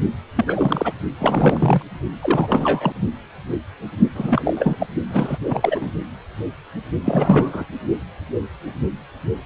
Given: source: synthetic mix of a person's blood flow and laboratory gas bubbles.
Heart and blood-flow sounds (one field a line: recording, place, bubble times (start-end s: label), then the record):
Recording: Doppler ultrasound of blood flow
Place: precordium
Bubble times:
0.36-0.45 s: bubbles
0.47-0.93 s: bubbles
1.18-1.82 s: bubbles
2.19-2.92 s: bubbles
4.15-4.87 s: bubbles
5.09-5.38 s: bubbles
5.45-5.91 s: bubbles
7.05-7.65 s: bubbles
From the record:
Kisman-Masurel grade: 333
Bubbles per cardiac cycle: rolling drumbeat, 9 or more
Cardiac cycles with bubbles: 50 to 99%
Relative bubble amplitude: loud (0.450 to 0.775)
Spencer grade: 3 (all of the cardiac periods contain showers or single bubble signals, but not dominating or overriding the cardiac motion signals)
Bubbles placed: only in the low amplitude regions of the cardiac cycle